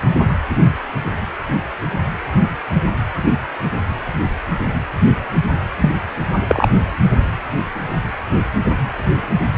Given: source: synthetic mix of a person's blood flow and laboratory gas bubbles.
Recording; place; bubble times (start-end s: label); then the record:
Doppler ultrasound of blood flow; precordium
5.80-5.90 s: bubbles
6.47-6.68 s: bubbles
From the record:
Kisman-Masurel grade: 113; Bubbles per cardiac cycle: 1 to 2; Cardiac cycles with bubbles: 1 to 10%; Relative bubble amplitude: loud (0.450 to 0.775); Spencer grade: 1 (occasional bubble signal discernible with the cardiac motion signal, with majority of cardiac periods free of bubbles); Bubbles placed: anywhere in the cardiac cycle